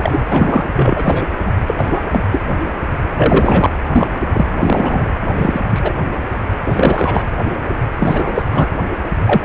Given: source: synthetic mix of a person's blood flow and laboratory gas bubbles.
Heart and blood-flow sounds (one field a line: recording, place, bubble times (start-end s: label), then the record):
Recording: Doppler ultrasound of blood flow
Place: precordium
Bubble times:
0.00-0.64 s: bubbles
0.76-1.27 s: bubbles
1.67-1.74 s: bubbles
1.77-2.06 s: bubbles
2.11-2.20 s: bubbles
2.31-2.55 s: bubbles
3.17-3.69 s: bubbles
3.92-4.08 s: bubbles
4.34-4.46 s: bubbles
4.59-5.07 s: bubbles
5.35-5.61 s: bubbles
5.69-5.93 s: bubbles
6.64-7.25 s: bubbles
8.00-8.43 s: bubbles
8.51-8.69 s: bubbles
9.24-9.45 s: bubbles
From the record:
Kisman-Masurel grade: 233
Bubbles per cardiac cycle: several, 3 to 8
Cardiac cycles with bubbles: 50 to 99%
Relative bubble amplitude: loud (0.450 to 0.775)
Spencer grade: 3 (all of the cardiac periods contain showers or single bubble signals, but not dominating or overriding the cardiac motion signals)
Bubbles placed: anywhere in the cardiac cycle